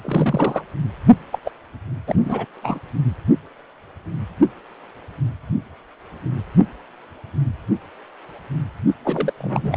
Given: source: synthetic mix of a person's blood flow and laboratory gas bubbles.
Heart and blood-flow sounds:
Doppler ultrasound of blood flow; precordium
0.03-0.64 s: bubbles
1.32-1.39 s: bubbles
1.45-1.51 s: bubbles
2.07-2.15 s: bubbles
2.19-2.46 s: bubbles
2.63-2.80 s: bubbles
9.04-9.33 s: bubbles
9.37-9.77 s: bubbles
From the record:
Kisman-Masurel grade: 332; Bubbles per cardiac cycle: rolling drumbeat, 9 or more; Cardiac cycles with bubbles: 50 to 99%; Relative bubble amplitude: moderate (0.250 to 0.450); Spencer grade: 3 (all of the cardiac periods contain showers or single bubble signals, but not dominating or overriding the cardiac motion signals); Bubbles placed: only in the low amplitude regions of the cardiac cycle

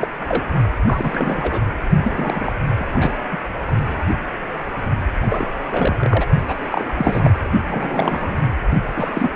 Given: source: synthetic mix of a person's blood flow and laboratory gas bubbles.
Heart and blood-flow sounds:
Doppler ultrasound of blood flow; precordium
0.00-0.07 s: bubbles
0.20-0.25 s: bubbles
0.28-0.46 s: bubbles
0.86-1.62 s: bubbles
2.02-2.56 s: bubbles
2.79-2.86 s: bubbles
2.94-3.11 s: bubbles
3.31-3.38 s: bubbles
5.22-5.51 s: bubbles
5.71-6.25 s: bubbles
6.44-7.30 s: bubbles
7.67-8.37 s: bubbles
8.95-9.11 s: bubbles
9.13-9.30 s: bubbles
From the record:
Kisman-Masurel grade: 332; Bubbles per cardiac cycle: rolling drumbeat, 9 or more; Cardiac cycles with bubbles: 50 to 99%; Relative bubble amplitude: moderate (0.250 to 0.450); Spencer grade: 3 (all of the cardiac periods contain showers or single bubble signals, but not dominating or overriding the cardiac motion signals); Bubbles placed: only in the low amplitude regions of the cardiac cycle

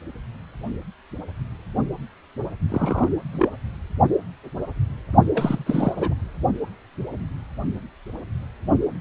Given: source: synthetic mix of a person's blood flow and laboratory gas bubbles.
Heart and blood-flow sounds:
Doppler ultrasound of blood flow; precordium
2.69-3.08 s: bubbles
3.31-3.48 s: bubbles
5.33-5.93 s: bubbles
5.96-6.13 s: bubbles
From the record:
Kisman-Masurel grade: 222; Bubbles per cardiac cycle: several, 3 to 8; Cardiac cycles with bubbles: 10 to 50%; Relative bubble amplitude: moderate (0.250 to 0.450); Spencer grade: 2 (many but less than half of the cardiac periods contain bubble signals, singularly or in groups); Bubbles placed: only in the low amplitude regions of the cardiac cycle

